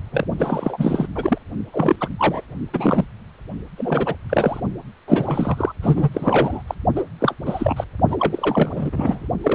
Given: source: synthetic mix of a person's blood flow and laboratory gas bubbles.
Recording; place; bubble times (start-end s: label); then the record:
Doppler ultrasound of blood flow; precordium
0.12-0.27 s: bubbles
0.38-1.07 s: bubbles
1.15-1.38 s: bubbles
1.72-1.96 s: bubbles
2.01-2.09 s: bubbles
2.18-2.42 s: bubbles
2.73-3.04 s: bubbles
3.78-4.15 s: bubbles
4.29-4.61 s: bubbles
5.07-5.72 s: bubbles
5.82-6.62 s: bubbles
6.67-6.75 s: bubbles
6.96-7.04 s: bubbles
7.20-7.34 s: bubbles
7.45-7.84 s: bubbles
8.07-9.28 s: bubbles
9.43-9.55 s: bubbles
From the record:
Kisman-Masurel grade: 343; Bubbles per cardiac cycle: rolling drumbeat, 9 or more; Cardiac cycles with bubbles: 100%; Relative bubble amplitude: loud (0.450 to 0.775); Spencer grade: 3 (all of the cardiac periods contain showers or single bubble signals, but not dominating or overriding the cardiac motion signals); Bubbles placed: only in the low amplitude regions of the cardiac cycle